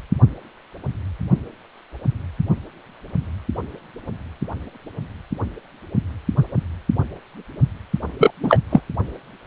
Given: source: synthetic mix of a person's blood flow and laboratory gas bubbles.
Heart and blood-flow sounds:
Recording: Doppler ultrasound of blood flow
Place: precordium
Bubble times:
8.18-8.31 s: bubbles
8.43-8.60 s: bubbles
8.70-8.82 s: bubbles
From the record:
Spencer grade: 1 (occasional bubble signal discernible with the cardiac motion signal, with majority of cardiac periods free of bubbles)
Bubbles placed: only in the low amplitude regions of the cardiac cycle

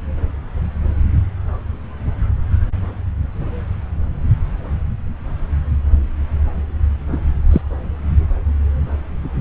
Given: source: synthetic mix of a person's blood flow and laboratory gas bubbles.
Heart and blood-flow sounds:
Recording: Doppler ultrasound of blood flow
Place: subclavian vein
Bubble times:
7.12-7.17 s: bubbles
7.50-7.62 s: bubbles
From the record:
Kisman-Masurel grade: 113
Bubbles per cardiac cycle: 1 to 2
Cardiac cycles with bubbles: 1 to 10%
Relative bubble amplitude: loud (0.450 to 0.775)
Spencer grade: 1 (occasional bubble signal discernible with the cardiac motion signal, with majority of cardiac periods free of bubbles)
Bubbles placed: anywhere in the cardiac cycle

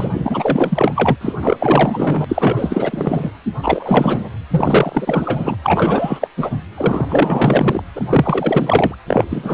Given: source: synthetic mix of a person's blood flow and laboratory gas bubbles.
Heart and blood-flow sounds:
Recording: Doppler ultrasound of blood flow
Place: precordium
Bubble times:
0.00-1.17 s: bubbles
1.21-1.33 s: bubbles
1.43-1.57 s: bubbles
1.59-2.24 s: bubbles
2.28-3.31 s: bubbles
3.62-4.29 s: bubbles
4.50-5.56 s: bubbles
5.62-6.28 s: bubbles
6.37-6.50 s: bubbles
6.77-7.05 s: bubbles
7.08-7.83 s: bubbles
7.95-8.95 s: bubbles
9.06-9.25 s: bubbles
9.29-9.54 s: bubbles
From the record:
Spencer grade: 4 (maximum detectable bubble signal sounding continuously throughout systole and diastole of every cardiac period, and overriding the amplitude of the normal cardiac signals)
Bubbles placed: anywhere in the cardiac cycle

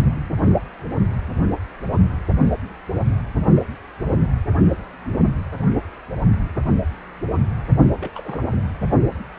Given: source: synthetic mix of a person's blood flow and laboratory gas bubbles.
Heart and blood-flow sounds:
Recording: Doppler ultrasound of blood flow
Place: precordium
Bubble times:
8.00-8.11 s: bubbles
8.14-8.40 s: bubbles
8.47-8.57 s: bubbles
From the record:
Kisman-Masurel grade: 211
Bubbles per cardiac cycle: several, 3 to 8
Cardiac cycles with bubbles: 1 to 10%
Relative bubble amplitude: barely perceptible (0.100 to 0.250)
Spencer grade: 1 (occasional bubble signal discernible with the cardiac motion signal, with majority of cardiac periods free of bubbles)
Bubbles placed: only in the low amplitude regions of the cardiac cycle

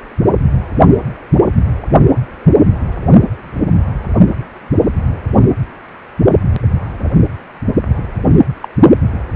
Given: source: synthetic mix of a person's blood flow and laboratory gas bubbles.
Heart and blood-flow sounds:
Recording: Doppler ultrasound of blood flow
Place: precordium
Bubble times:
7.94-8.03 s: bubbles
8.62-8.69 s: bubbles
From the record:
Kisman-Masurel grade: 112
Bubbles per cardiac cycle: 1 to 2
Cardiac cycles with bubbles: 1 to 10%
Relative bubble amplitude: moderate (0.250 to 0.450)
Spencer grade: 1 (occasional bubble signal discernible with the cardiac motion signal, with majority of cardiac periods free of bubbles)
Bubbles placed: only in the low amplitude regions of the cardiac cycle

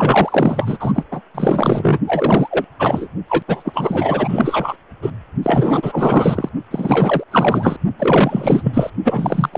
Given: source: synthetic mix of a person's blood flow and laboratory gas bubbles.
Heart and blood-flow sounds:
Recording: Doppler ultrasound of blood flow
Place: precordium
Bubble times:
0.00-1.05 s: bubbles
1.11-1.21 s: bubbles
1.34-1.98 s: bubbles
2.06-2.66 s: bubbles
2.79-3.08 s: bubbles
3.27-3.42 s: bubbles
3.48-4.77 s: bubbles
5.01-5.11 s: bubbles
5.42-6.49 s: bubbles
6.71-7.24 s: bubbles
7.31-7.79 s: bubbles
7.99-8.90 s: bubbles
9.04-9.49 s: bubbles
9.52-9.57 s: bubbles
From the record:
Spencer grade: 4 (maximum detectable bubble signal sounding continuously throughout systole and diastole of every cardiac period, and overriding the amplitude of the normal cardiac signals)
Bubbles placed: only in the low amplitude regions of the cardiac cycle

